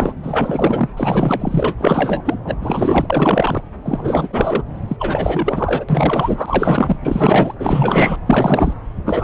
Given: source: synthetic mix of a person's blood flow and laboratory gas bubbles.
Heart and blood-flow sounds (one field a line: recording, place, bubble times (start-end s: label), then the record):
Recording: Doppler ultrasound of blood flow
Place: subclavian vein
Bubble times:
0.00-0.13 s: bubbles
0.22-0.89 s: bubbles
0.97-1.74 s: bubbles
1.78-2.38 s: bubbles
2.45-2.56 s: bubbles
2.61-3.06 s: bubbles
3.09-3.62 s: bubbles
3.84-4.30 s: bubbles
4.33-4.63 s: bubbles
4.88-5.86 s: bubbles
5.88-6.96 s: bubbles
7.01-7.54 s: bubbles
7.59-8.16 s: bubbles
8.26-8.74 s: bubbles
9.05-9.24 s: bubbles
From the record:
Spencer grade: 4 (maximum detectable bubble signal sounding continuously throughout systole and diastole of every cardiac period, and overriding the amplitude of the normal cardiac signals)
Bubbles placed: anywhere in the cardiac cycle